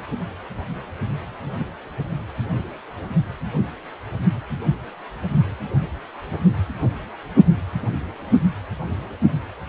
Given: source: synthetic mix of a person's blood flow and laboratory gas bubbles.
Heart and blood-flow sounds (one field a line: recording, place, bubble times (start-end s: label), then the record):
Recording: Doppler ultrasound of blood flow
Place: precordium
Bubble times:
no bubbles
From the record:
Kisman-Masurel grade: 000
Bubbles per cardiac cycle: 0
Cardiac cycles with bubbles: 0%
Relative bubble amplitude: no bubbles discernible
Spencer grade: 0 (complete lack of bubble signals)